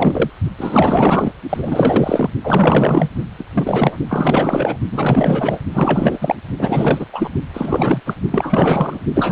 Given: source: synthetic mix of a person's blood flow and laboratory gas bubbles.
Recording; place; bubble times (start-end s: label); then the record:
Doppler ultrasound of blood flow; precordium
0.00-0.30 s: bubbles
0.57-1.33 s: bubbles
1.49-2.30 s: bubbles
2.43-3.09 s: bubbles
3.38-3.44 s: bubbles
3.52-3.96 s: bubbles
4.09-4.77 s: bubbles
4.91-5.61 s: bubbles
5.74-6.35 s: bubbles
6.58-7.06 s: bubbles
7.12-7.30 s: bubbles
7.54-8.01 s: bubbles
8.06-8.14 s: bubbles
8.30-8.99 s: bubbles
9.14-9.32 s: bubbles
From the record:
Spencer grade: 4 (maximum detectable bubble signal sounding continuously throughout systole and diastole of every cardiac period, and overriding the amplitude of the normal cardiac signals); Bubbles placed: only in the low amplitude regions of the cardiac cycle